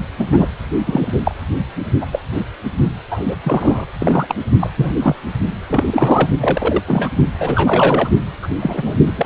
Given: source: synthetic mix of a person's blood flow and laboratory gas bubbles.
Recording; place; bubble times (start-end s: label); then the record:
Doppler ultrasound of blood flow; precordium
0.19-0.48 s: bubbles
0.87-1.13 s: bubbles
1.25-1.35 s: bubbles
2.00-2.05 s: bubbles
2.12-2.19 s: bubbles
2.32-2.46 s: bubbles
3.10-3.34 s: bubbles
3.44-3.85 s: bubbles
4.00-4.36 s: bubbles
4.60-4.70 s: bubbles
4.77-4.98 s: bubbles
5.02-5.16 s: bubbles
5.68-6.28 s: bubbles
6.40-6.82 s: bubbles
6.87-7.08 s: bubbles
7.39-8.10 s: bubbles
8.42-8.49 s: bubbles
8.61-8.95 s: bubbles
9.06-9.13 s: bubbles
9.17-9.26 s: bubbles
From the record:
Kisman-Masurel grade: 243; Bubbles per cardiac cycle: several, 3 to 8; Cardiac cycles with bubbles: 100%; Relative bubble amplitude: loud (0.450 to 0.775); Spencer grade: 3 (all of the cardiac periods contain showers or single bubble signals, but not dominating or overriding the cardiac motion signals); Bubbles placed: only in the low amplitude regions of the cardiac cycle